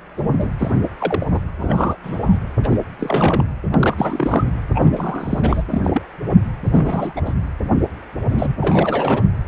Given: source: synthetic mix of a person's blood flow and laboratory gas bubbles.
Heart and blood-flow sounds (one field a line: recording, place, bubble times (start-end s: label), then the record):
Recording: Doppler ultrasound of blood flow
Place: precordium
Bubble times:
0.17-0.22 s: bubbles
0.36-0.47 s: bubbles
0.58-0.71 s: bubbles
0.99-1.26 s: bubbles
1.31-1.40 s: bubbles
1.59-1.97 s: bubbles
2.03-2.41 s: bubbles
2.63-2.77 s: bubbles
2.99-3.46 s: bubbles
3.74-4.45 s: bubbles
4.75-5.63 s: bubbles
5.71-6.02 s: bubbles
6.27-6.34 s: bubbles
6.66-7.21 s: bubbles
7.25-7.33 s: bubbles
8.29-8.56 s: bubbles
8.61-9.23 s: bubbles
From the record:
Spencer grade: 3 (all of the cardiac periods contain showers or single bubble signals, but not dominating or overriding the cardiac motion signals)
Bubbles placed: anywhere in the cardiac cycle